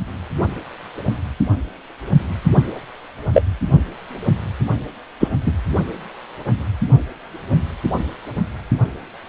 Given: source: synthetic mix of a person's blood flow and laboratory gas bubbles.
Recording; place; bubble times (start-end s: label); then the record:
Doppler ultrasound of blood flow; precordium
3.33-3.42 s: bubbles
5.20-5.29 s: bubbles
5.46-5.52 s: bubbles
From the record:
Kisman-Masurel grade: 123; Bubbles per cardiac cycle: 1 to 2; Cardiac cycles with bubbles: 10 to 50%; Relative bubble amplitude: loud (0.450 to 0.775); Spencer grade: 2 (many but less than half of the cardiac periods contain bubble signals, singularly or in groups); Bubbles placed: only in the low amplitude regions of the cardiac cycle